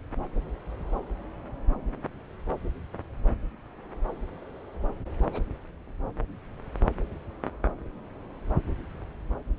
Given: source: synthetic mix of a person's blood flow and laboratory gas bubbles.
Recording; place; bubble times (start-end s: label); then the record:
Doppler ultrasound of blood flow; subclavian vein
5.26-5.52 s: bubbles
From the record:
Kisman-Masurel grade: 111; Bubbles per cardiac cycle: 1 to 2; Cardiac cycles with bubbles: 1 to 10%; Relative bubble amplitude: barely perceptible (0.100 to 0.250); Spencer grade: 1 (occasional bubble signal discernible with the cardiac motion signal, with majority of cardiac periods free of bubbles); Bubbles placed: anywhere in the cardiac cycle